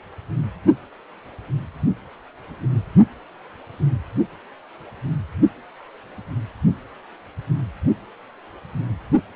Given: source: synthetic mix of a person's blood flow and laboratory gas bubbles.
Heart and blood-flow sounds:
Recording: Doppler ultrasound of blood flow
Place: precordium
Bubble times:
no bubbles
From the record:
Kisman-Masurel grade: 000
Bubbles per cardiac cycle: 0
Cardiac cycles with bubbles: 0%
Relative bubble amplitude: no bubbles discernible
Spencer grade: 0 (complete lack of bubble signals)

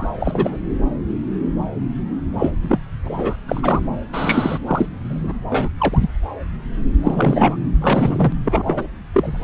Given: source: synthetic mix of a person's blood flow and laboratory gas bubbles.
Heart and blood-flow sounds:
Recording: Doppler ultrasound of blood flow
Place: subclavian vein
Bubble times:
0.00-0.08 s: bubbles
0.20-0.57 s: bubbles
2.39-2.51 s: bubbles
2.62-2.78 s: bubbles
3.04-3.37 s: bubbles
3.48-3.80 s: bubbles
4.12-4.58 s: bubbles
4.66-4.87 s: bubbles
5.04-5.33 s: bubbles
5.50-5.70 s: bubbles
5.78-6.08 s: bubbles
7.04-7.57 s: bubbles
7.80-8.32 s: bubbles
8.45-8.63 s: bubbles
8.65-8.87 s: bubbles
9.13-9.38 s: bubbles
From the record:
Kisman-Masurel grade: 233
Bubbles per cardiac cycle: several, 3 to 8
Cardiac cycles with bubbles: 50 to 99%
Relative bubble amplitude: loud (0.450 to 0.775)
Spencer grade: 3 (all of the cardiac periods contain showers or single bubble signals, but not dominating or overriding the cardiac motion signals)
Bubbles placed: anywhere in the cardiac cycle

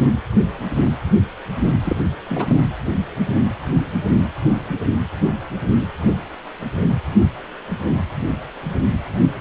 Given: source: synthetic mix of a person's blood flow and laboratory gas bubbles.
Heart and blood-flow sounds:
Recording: Doppler ultrasound of blood flow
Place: precordium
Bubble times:
1.84-1.97 s: bubbles
2.29-2.59 s: bubbles
From the record:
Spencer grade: 1 (occasional bubble signal discernible with the cardiac motion signal, with majority of cardiac periods free of bubbles)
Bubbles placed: anywhere in the cardiac cycle

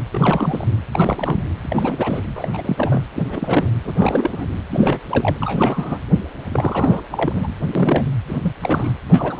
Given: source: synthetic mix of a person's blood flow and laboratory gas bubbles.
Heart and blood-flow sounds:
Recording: Doppler ultrasound of blood flow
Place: precordium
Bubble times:
0.12-0.66 s: bubbles
0.93-1.44 s: bubbles
1.62-2.22 s: bubbles
2.35-2.48 s: bubbles
2.53-3.02 s: bubbles
3.15-3.23 s: bubbles
3.29-3.72 s: bubbles
3.84-3.93 s: bubbles
3.97-4.46 s: bubbles
4.70-5.00 s: bubbles
5.09-5.37 s: bubbles
5.41-5.99 s: bubbles
6.52-7.01 s: bubbles
7.10-7.48 s: bubbles
7.75-8.08 s: bubbles
8.27-8.53 s: bubbles
8.60-8.91 s: bubbles
9.08-9.40 s: bubbles
From the record:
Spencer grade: 3 (all of the cardiac periods contain showers or single bubble signals, but not dominating or overriding the cardiac motion signals)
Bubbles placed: anywhere in the cardiac cycle

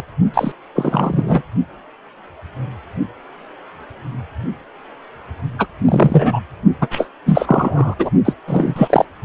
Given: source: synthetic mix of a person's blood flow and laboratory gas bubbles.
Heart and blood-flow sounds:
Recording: Doppler ultrasound of blood flow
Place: precordium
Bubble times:
0.00-0.03 s: bubbles
0.33-0.52 s: bubbles
0.75-1.42 s: bubbles
5.58-5.67 s: bubbles
5.85-6.39 s: bubbles
6.80-6.88 s: bubbles
6.90-7.08 s: bubbles
7.26-7.95 s: bubbles
7.99-8.10 s: bubbles
8.24-8.33 s: bubbles
8.47-9.05 s: bubbles
From the record:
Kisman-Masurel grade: 233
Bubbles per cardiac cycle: several, 3 to 8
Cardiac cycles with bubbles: 50 to 99%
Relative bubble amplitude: loud (0.450 to 0.775)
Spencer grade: 3 (all of the cardiac periods contain showers or single bubble signals, but not dominating or overriding the cardiac motion signals)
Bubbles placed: only in the low amplitude regions of the cardiac cycle

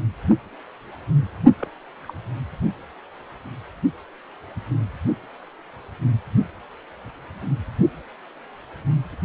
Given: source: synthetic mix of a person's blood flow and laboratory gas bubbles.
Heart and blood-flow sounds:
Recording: Doppler ultrasound of blood flow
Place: precordium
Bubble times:
1.57-1.67 s: bubbles
2.02-2.13 s: bubbles
From the record:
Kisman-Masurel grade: 121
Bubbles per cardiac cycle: 1 to 2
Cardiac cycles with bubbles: 10 to 50%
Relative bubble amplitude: barely perceptible (0.100 to 0.250)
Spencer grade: 2 (many but less than half of the cardiac periods contain bubble signals, singularly or in groups)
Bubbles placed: only in the low amplitude regions of the cardiac cycle

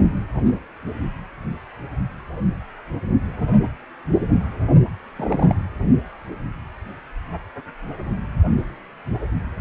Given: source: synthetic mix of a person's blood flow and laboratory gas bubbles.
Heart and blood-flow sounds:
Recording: Doppler ultrasound of blood flow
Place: precordium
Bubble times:
5.16-5.56 s: bubbles
From the record:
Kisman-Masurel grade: 112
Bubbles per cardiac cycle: 1 to 2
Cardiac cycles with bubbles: 1 to 10%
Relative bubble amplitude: moderate (0.250 to 0.450)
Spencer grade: 1 (occasional bubble signal discernible with the cardiac motion signal, with majority of cardiac periods free of bubbles)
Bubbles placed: only in the low amplitude regions of the cardiac cycle

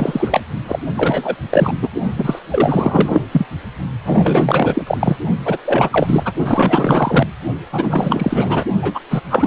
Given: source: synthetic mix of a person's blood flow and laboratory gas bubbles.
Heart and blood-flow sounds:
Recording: Doppler ultrasound of blood flow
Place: precordium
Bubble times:
0.00-0.40 s: bubbles
0.67-0.79 s: bubbles
0.94-1.36 s: bubbles
1.49-1.73 s: bubbles
1.81-1.90 s: bubbles
2.17-2.39 s: bubbles
2.50-3.21 s: bubbles
3.31-3.46 s: bubbles
4.04-4.83 s: bubbles
4.87-4.97 s: bubbles
5.00-5.16 s: bubbles
5.45-5.58 s: bubbles
5.64-6.33 s: bubbles
6.45-7.27 s: bubbles
7.72-8.64 s: bubbles
8.82-9.01 s: bubbles
9.10-9.21 s: bubbles
9.30-9.47 s: bubbles
From the record:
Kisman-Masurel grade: 444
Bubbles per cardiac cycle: continuous sound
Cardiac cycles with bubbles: 100%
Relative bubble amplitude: maximal (0.775 to 0.999)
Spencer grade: 4 (maximum detectable bubble signal sounding continuously throughout systole and diastole of every cardiac period, and overriding the amplitude of the normal cardiac signals)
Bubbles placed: only in the low amplitude regions of the cardiac cycle

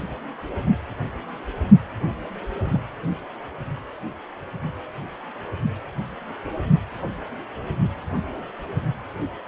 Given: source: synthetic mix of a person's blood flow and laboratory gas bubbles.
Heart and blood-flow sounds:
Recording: Doppler ultrasound of blood flow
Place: precordium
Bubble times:
2.64-2.80 s: bubbles
From the record:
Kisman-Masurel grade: 112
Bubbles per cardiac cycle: 1 to 2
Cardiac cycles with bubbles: 1 to 10%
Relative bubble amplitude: moderate (0.250 to 0.450)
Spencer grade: 1 (occasional bubble signal discernible with the cardiac motion signal, with majority of cardiac periods free of bubbles)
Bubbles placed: only in the low amplitude regions of the cardiac cycle

